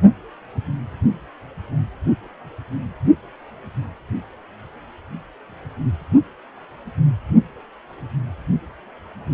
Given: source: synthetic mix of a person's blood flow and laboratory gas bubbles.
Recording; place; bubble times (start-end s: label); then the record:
Doppler ultrasound of blood flow; precordium
no bubbles
From the record:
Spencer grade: 0 (complete lack of bubble signals)